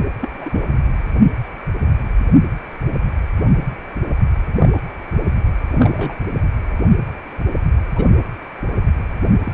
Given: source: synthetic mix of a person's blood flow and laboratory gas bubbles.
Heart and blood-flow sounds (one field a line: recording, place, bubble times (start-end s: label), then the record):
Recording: Doppler ultrasound of blood flow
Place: precordium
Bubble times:
0.21-0.67 s: bubbles
4.48-4.79 s: bubbles
5.74-6.16 s: bubbles
7.95-8.05 s: bubbles
9.44-9.53 s: bubbles
From the record:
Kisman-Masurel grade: 122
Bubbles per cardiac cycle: 1 to 2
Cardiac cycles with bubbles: 10 to 50%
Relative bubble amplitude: moderate (0.250 to 0.450)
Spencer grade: 2 (many but less than half of the cardiac periods contain bubble signals, singularly or in groups)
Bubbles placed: anywhere in the cardiac cycle